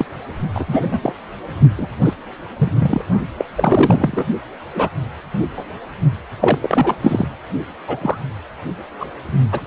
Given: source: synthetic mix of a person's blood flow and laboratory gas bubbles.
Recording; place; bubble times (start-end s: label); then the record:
Doppler ultrasound of blood flow; precordium
0.00-0.05 s: bubbles
0.54-0.65 s: bubbles
0.68-0.87 s: bubbles
0.91-0.99 s: bubbles
1.02-1.13 s: bubbles
1.77-1.87 s: bubbles
2.01-2.14 s: bubbles
2.58-3.01 s: bubbles
3.38-3.45 s: bubbles
3.55-4.26 s: bubbles
4.73-4.90 s: bubbles
5.56-5.63 s: bubbles
6.40-6.96 s: bubbles
7.00-7.28 s: bubbles
7.88-7.97 s: bubbles
8.00-8.18 s: bubbles
8.99-9.10 s: bubbles
9.52-9.60 s: bubbles
From the record:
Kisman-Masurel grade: 243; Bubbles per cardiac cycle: several, 3 to 8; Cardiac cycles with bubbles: 100%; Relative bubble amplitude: loud (0.450 to 0.775); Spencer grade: 3 (all of the cardiac periods contain showers or single bubble signals, but not dominating or overriding the cardiac motion signals); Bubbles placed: only in the low amplitude regions of the cardiac cycle